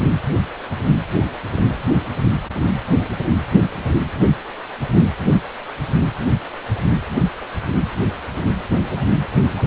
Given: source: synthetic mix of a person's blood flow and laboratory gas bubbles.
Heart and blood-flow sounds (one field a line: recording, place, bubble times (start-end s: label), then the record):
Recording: Doppler ultrasound of blood flow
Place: precordium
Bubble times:
8.84-9.18 s: bubbles
9.56-9.63 s: bubbles
From the record:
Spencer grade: 1 (occasional bubble signal discernible with the cardiac motion signal, with majority of cardiac periods free of bubbles)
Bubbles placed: anywhere in the cardiac cycle